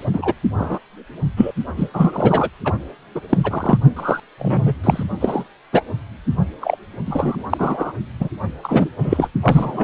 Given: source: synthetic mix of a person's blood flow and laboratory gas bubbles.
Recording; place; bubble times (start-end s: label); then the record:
Doppler ultrasound of blood flow; precordium
0.13-0.34 s: bubbles
0.58-0.78 s: bubbles
1.36-1.52 s: bubbles
1.76-1.91 s: bubbles
1.94-2.50 s: bubbles
2.65-2.74 s: bubbles
3.15-3.21 s: bubbles
3.29-3.78 s: bubbles
3.96-4.20 s: bubbles
4.38-4.75 s: bubbles
4.83-5.04 s: bubbles
5.20-5.44 s: bubbles
5.73-5.82 s: bubbles
6.60-6.76 s: bubbles
7.06-7.43 s: bubbles
7.50-7.92 s: bubbles
8.19-8.29 s: bubbles
8.63-8.89 s: bubbles
8.98-9.28 s: bubbles
9.42-9.84 s: bubbles
From the record:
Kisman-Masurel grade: 233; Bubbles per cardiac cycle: several, 3 to 8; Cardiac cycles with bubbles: 50 to 99%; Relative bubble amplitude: loud (0.450 to 0.775); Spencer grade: 3 (all of the cardiac periods contain showers or single bubble signals, but not dominating or overriding the cardiac motion signals); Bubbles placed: only in the low amplitude regions of the cardiac cycle